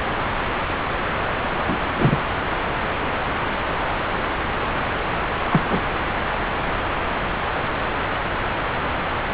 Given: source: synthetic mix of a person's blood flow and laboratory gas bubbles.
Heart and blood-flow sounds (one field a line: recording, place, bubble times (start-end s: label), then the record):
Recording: Doppler ultrasound of blood flow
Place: subclavian vein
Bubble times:
1.67-1.78 s: bubbles
1.97-2.17 s: bubbles
5.51-5.82 s: bubbles
From the record:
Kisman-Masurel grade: 122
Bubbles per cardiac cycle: 1 to 2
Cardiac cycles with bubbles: 10 to 50%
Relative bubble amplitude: moderate (0.250 to 0.450)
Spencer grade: 2 (many but less than half of the cardiac periods contain bubble signals, singularly or in groups)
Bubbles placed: anywhere in the cardiac cycle